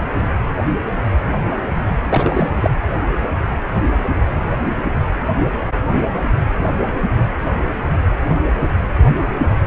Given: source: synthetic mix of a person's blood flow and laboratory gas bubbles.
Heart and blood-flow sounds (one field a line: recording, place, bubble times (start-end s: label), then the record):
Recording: Doppler ultrasound of blood flow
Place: precordium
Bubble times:
2.09-2.70 s: bubbles
From the record:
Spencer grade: 1 (occasional bubble signal discernible with the cardiac motion signal, with majority of cardiac periods free of bubbles)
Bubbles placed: anywhere in the cardiac cycle